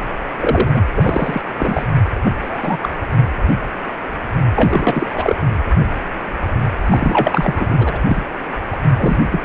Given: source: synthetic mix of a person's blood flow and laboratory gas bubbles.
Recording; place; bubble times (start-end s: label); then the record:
Doppler ultrasound of blood flow; precordium
0.40-0.89 s: bubbles
0.95-1.42 s: bubbles
1.56-1.85 s: bubbles
2.25-2.30 s: bubbles
2.42-2.77 s: bubbles
2.82-2.90 s: bubbles
4.55-5.36 s: bubbles
6.86-8.00 s: bubbles
8.05-8.22 s: bubbles
8.72-8.77 s: bubbles
8.97-9.17 s: bubbles
9.31-9.40 s: bubbles
From the record:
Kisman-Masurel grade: 233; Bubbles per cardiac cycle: several, 3 to 8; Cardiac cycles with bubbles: 50 to 99%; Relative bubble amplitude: loud (0.450 to 0.775); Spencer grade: 3 (all of the cardiac periods contain showers or single bubble signals, but not dominating or overriding the cardiac motion signals); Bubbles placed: anywhere in the cardiac cycle